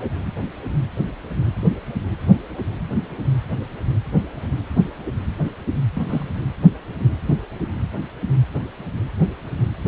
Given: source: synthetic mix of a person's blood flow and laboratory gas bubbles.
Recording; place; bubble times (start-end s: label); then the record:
Doppler ultrasound of blood flow; precordium
5.95-6.29 s: bubbles
From the record:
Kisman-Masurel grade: 211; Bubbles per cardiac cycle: several, 3 to 8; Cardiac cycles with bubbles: 1 to 10%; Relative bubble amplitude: barely perceptible (0.100 to 0.250); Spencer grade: 1 (occasional bubble signal discernible with the cardiac motion signal, with majority of cardiac periods free of bubbles); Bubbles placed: anywhere in the cardiac cycle